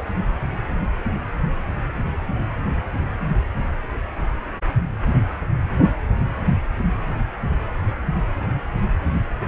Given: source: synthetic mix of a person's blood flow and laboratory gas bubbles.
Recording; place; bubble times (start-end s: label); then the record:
Doppler ultrasound of blood flow; precordium
0.00-0.02 s: bubbles
From the record:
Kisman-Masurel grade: 221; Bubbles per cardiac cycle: several, 3 to 8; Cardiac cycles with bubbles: 10 to 50%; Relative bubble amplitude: barely perceptible (0.100 to 0.250); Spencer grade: 2 (many but less than half of the cardiac periods contain bubble signals, singularly or in groups); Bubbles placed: anywhere in the cardiac cycle